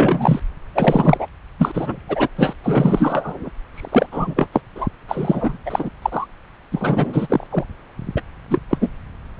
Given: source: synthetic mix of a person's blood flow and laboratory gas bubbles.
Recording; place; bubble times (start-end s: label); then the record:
Doppler ultrasound of blood flow; subclavian vein
0.00-0.40 s: bubbles
0.74-1.27 s: bubbles
1.58-1.98 s: bubbles
2.08-2.28 s: bubbles
2.38-2.54 s: bubbles
2.63-3.50 s: bubbles
3.74-4.47 s: bubbles
4.52-4.61 s: bubbles
4.75-4.88 s: bubbles
5.08-5.58 s: bubbles
5.66-5.90 s: bubbles
6.02-6.26 s: bubbles
6.72-7.47 s: bubbles
7.50-7.64 s: bubbles
8.16-8.21 s: bubbles
8.48-8.59 s: bubbles
8.70-8.78 s: bubbles
8.80-8.91 s: bubbles
From the record:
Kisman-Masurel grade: 333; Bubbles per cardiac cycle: rolling drumbeat, 9 or more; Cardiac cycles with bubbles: 50 to 99%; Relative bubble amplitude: loud (0.450 to 0.775); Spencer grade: 3 (all of the cardiac periods contain showers or single bubble signals, but not dominating or overriding the cardiac motion signals); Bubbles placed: anywhere in the cardiac cycle